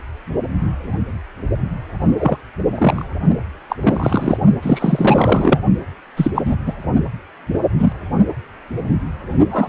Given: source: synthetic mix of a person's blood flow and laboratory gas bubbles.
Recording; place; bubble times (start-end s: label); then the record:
Doppler ultrasound of blood flow; precordium
2.19-2.38 s: bubbles
2.75-3.06 s: bubbles
3.69-3.76 s: bubbles
3.81-4.38 s: bubbles
4.62-5.59 s: bubbles
6.17-6.31 s: bubbles
6.34-6.42 s: bubbles
6.45-6.55 s: bubbles
6.66-6.74 s: bubbles
7.54-7.59 s: bubbles
7.77-7.92 s: bubbles
9.50-9.69 s: bubbles
From the record:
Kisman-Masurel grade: 233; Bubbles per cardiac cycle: several, 3 to 8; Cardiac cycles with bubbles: 50 to 99%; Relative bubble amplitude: loud (0.450 to 0.775); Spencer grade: 3 (all of the cardiac periods contain showers or single bubble signals, but not dominating or overriding the cardiac motion signals); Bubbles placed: only in the low amplitude regions of the cardiac cycle